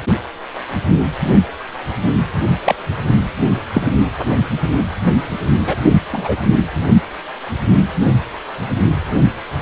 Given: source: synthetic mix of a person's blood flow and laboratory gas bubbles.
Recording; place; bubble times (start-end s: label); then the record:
Doppler ultrasound of blood flow; precordium
2.65-2.75 s: bubbles
3.74-3.89 s: bubbles
5.66-5.77 s: bubbles
6.12-6.36 s: bubbles
From the record:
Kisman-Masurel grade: 123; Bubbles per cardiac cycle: 1 to 2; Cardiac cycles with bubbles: 10 to 50%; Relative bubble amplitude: loud (0.450 to 0.775); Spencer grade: 2 (many but less than half of the cardiac periods contain bubble signals, singularly or in groups); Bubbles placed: only in the low amplitude regions of the cardiac cycle